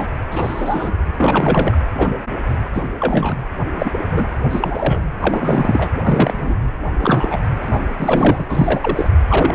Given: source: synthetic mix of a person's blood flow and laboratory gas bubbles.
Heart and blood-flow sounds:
Doppler ultrasound of blood flow; precordium
0.00-0.06 s: bubbles
0.29-0.92 s: bubbles
1.17-1.77 s: bubbles
1.96-2.15 s: bubbles
2.75-2.89 s: bubbles
3.00-3.35 s: bubbles
3.80-4.26 s: bubbles
4.51-5.14 s: bubbles
5.20-5.94 s: bubbles
5.96-6.56 s: bubbles
7.00-7.38 s: bubbles
7.61-7.81 s: bubbles
7.98-8.46 s: bubbles
8.50-9.08 s: bubbles
9.28-9.55 s: bubbles
From the record:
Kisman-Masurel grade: 242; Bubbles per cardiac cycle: several, 3 to 8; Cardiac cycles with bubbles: 100%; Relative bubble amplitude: moderate (0.250 to 0.450); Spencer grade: 3 (all of the cardiac periods contain showers or single bubble signals, but not dominating or overriding the cardiac motion signals); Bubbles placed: anywhere in the cardiac cycle

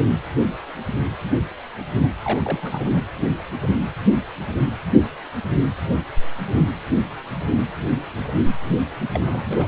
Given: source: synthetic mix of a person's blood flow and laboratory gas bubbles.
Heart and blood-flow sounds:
Doppler ultrasound of blood flow; precordium
2.23-3.02 s: bubbles
9.12-9.21 s: bubbles
9.24-9.68 s: bubbles
From the record:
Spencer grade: 2 (many but less than half of the cardiac periods contain bubble signals, singularly or in groups); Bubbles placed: anywhere in the cardiac cycle

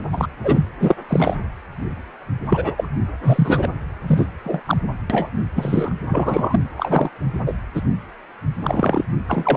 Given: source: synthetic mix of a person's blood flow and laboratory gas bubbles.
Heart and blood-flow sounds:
Doppler ultrasound of blood flow; precordium
0.12-0.27 s: bubbles
0.43-0.63 s: bubbles
0.80-0.95 s: bubbles
1.08-1.36 s: bubbles
2.49-2.89 s: bubbles
3.23-3.68 s: bubbles
4.07-4.27 s: bubbles
4.44-4.61 s: bubbles
4.66-4.77 s: bubbles
5.10-5.30 s: bubbles
5.55-5.94 s: bubbles
6.08-6.60 s: bubbles
6.77-7.10 s: bubbles
7.46-7.53 s: bubbles
7.75-7.82 s: bubbles
8.60-9.04 s: bubbles
9.28-9.57 s: bubbles
From the record:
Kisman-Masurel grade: 233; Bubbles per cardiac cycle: several, 3 to 8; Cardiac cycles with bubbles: 50 to 99%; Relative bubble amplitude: loud (0.450 to 0.775); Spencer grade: 3 (all of the cardiac periods contain showers or single bubble signals, but not dominating or overriding the cardiac motion signals); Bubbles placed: anywhere in the cardiac cycle

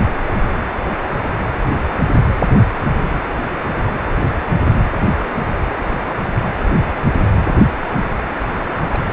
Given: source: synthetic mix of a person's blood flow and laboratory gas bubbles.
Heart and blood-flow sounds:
Doppler ultrasound of blood flow; precordium
8.72-9.13 s: bubbles
From the record:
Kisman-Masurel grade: 211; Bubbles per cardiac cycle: several, 3 to 8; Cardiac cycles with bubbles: 1 to 10%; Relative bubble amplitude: barely perceptible (0.100 to 0.250); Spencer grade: 1 (occasional bubble signal discernible with the cardiac motion signal, with majority of cardiac periods free of bubbles); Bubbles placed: anywhere in the cardiac cycle

